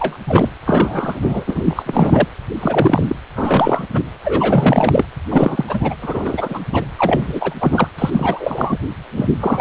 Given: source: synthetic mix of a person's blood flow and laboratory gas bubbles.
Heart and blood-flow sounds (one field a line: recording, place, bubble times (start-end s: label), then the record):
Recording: Doppler ultrasound of blood flow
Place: precordium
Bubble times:
0.00-0.17 s: bubbles
0.26-0.49 s: bubbles
0.66-1.83 s: bubbles
1.86-2.27 s: bubbles
2.60-3.15 s: bubbles
3.35-3.86 s: bubbles
3.92-4.00 s: bubbles
4.24-5.05 s: bubbles
5.29-5.94 s: bubbles
6.01-6.60 s: bubbles
6.72-6.84 s: bubbles
6.98-7.54 s: bubbles
7.60-7.88 s: bubbles
7.98-8.79 s: bubbles
9.16-9.29 s: bubbles
9.40-9.61 s: bubbles
From the record:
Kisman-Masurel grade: 343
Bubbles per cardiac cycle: rolling drumbeat, 9 or more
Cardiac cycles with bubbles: 100%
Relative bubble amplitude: loud (0.450 to 0.775)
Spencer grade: 3 (all of the cardiac periods contain showers or single bubble signals, but not dominating or overriding the cardiac motion signals)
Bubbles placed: anywhere in the cardiac cycle